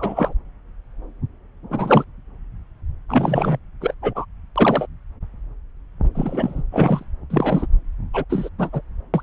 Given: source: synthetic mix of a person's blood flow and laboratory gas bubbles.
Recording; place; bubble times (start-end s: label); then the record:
Doppler ultrasound of blood flow; subclavian vein
0.00-0.33 s: bubbles
1.70-2.04 s: bubbles
3.08-3.59 s: bubbles
3.81-3.94 s: bubbles
4.02-4.25 s: bubbles
4.55-4.86 s: bubbles
6.14-6.63 s: bubbles
6.71-7.04 s: bubbles
7.30-7.66 s: bubbles
8.13-8.25 s: bubbles
8.29-8.49 s: bubbles
8.58-8.70 s: bubbles
8.72-8.81 s: bubbles
9.13-9.23 s: bubbles
From the record:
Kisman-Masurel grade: 233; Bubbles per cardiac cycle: several, 3 to 8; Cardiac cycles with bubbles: 50 to 99%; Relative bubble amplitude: loud (0.450 to 0.775); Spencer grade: 3 (all of the cardiac periods contain showers or single bubble signals, but not dominating or overriding the cardiac motion signals); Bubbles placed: anywhere in the cardiac cycle